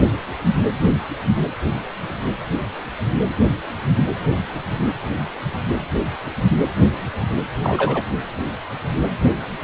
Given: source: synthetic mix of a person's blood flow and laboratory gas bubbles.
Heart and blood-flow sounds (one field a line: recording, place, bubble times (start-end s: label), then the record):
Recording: Doppler ultrasound of blood flow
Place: precordium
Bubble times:
7.63-8.04 s: bubbles
From the record:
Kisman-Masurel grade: 122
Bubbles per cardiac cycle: 1 to 2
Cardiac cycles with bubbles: 10 to 50%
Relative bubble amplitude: moderate (0.250 to 0.450)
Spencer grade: 2 (many but less than half of the cardiac periods contain bubble signals, singularly or in groups)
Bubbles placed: anywhere in the cardiac cycle